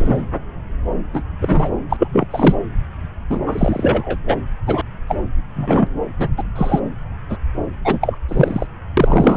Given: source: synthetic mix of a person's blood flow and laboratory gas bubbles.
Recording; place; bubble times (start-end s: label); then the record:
Doppler ultrasound of blood flow; subclavian vein
0.00-0.24 s: bubbles
1.13-1.22 s: bubbles
1.41-1.69 s: bubbles
1.89-2.08 s: bubbles
2.12-2.27 s: bubbles
2.31-2.56 s: bubbles
3.29-3.39 s: bubbles
3.46-4.17 s: bubbles
4.28-4.37 s: bubbles
4.66-4.82 s: bubbles
5.08-5.16 s: bubbles
5.56-5.87 s: bubbles
6.18-6.29 s: bubbles
6.38-6.42 s: bubbles
6.55-6.79 s: bubbles
7.29-7.37 s: bubbles
7.84-8.18 s: bubbles
8.28-8.66 s: bubbles
8.97-9.37 s: bubbles
From the record:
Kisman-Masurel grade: 233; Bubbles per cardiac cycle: several, 3 to 8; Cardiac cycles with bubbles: 50 to 99%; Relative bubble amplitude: loud (0.450 to 0.775); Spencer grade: 3 (all of the cardiac periods contain showers or single bubble signals, but not dominating or overriding the cardiac motion signals); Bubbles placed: anywhere in the cardiac cycle